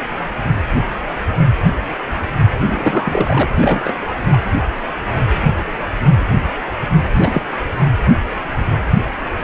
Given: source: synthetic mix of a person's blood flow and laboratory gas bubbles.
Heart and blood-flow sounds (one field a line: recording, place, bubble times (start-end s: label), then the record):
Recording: Doppler ultrasound of blood flow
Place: precordium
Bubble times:
2.65-3.50 s: bubbles
3.57-3.93 s: bubbles
4.06-4.14 s: bubbles
4.31-4.38 s: bubbles
7.12-7.42 s: bubbles
From the record:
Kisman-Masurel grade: 222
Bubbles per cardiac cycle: several, 3 to 8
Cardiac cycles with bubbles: 10 to 50%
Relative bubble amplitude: moderate (0.250 to 0.450)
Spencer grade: 2 (many but less than half of the cardiac periods contain bubble signals, singularly or in groups)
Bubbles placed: anywhere in the cardiac cycle